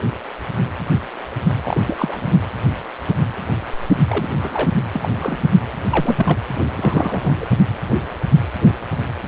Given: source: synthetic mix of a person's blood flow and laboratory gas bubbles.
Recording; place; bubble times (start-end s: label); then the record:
Doppler ultrasound of blood flow; precordium
1.64-1.80 s: bubbles
1.87-2.36 s: bubbles
4.08-4.33 s: bubbles
4.39-4.70 s: bubbles
4.94-5.08 s: bubbles
5.16-5.44 s: bubbles
5.91-6.38 s: bubbles
6.75-7.36 s: bubbles
7.40-7.50 s: bubbles
From the record:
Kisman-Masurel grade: 222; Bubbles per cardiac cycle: several, 3 to 8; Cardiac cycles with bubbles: 10 to 50%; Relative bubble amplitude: moderate (0.250 to 0.450); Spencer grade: 2 (many but less than half of the cardiac periods contain bubble signals, singularly or in groups); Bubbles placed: anywhere in the cardiac cycle